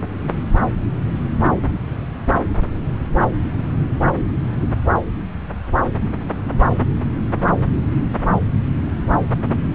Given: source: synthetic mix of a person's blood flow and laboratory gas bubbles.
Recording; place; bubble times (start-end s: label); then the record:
Doppler ultrasound of blood flow; subclavian vein
no bubbles
From the record:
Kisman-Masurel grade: 000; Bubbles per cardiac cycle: 0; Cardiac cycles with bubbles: 0%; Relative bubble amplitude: no bubbles discernible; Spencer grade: 0 (complete lack of bubble signals)